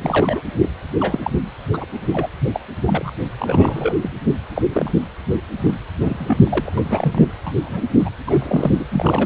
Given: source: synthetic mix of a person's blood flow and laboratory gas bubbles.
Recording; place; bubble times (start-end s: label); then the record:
Doppler ultrasound of blood flow; precordium
0.01-0.42 s: bubbles
0.56-0.69 s: bubbles
0.99-1.19 s: bubbles
1.23-1.31 s: bubbles
1.73-1.85 s: bubbles
2.12-2.28 s: bubbles
2.54-2.60 s: bubbles
2.85-3.11 s: bubbles
3.39-3.94 s: bubbles
4.03-4.10 s: bubbles
4.54-4.62 s: bubbles
4.72-4.92 s: bubbles
5.59-5.75 s: bubbles
5.81-5.84 s: bubbles
6.03-6.73 s: bubbles
6.77-7.29 s: bubbles
7.44-7.82 s: bubbles
8.00-8.09 s: bubbles
8.26-8.86 s: bubbles
8.91-9.26 s: bubbles
From the record:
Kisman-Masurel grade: 242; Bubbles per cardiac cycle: several, 3 to 8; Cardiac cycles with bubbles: 100%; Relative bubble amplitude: moderate (0.250 to 0.450); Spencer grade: 3 (all of the cardiac periods contain showers or single bubble signals, but not dominating or overriding the cardiac motion signals); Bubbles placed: anywhere in the cardiac cycle